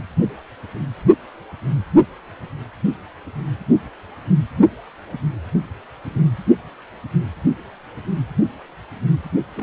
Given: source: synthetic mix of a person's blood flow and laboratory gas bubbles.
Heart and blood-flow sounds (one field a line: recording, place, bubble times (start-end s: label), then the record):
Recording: Doppler ultrasound of blood flow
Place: precordium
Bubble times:
9.56-9.63 s: bubbles
From the record:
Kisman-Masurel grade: 111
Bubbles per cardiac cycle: 1 to 2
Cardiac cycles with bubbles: 1 to 10%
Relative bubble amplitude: barely perceptible (0.100 to 0.250)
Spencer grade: 1 (occasional bubble signal discernible with the cardiac motion signal, with majority of cardiac periods free of bubbles)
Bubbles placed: only in the low amplitude regions of the cardiac cycle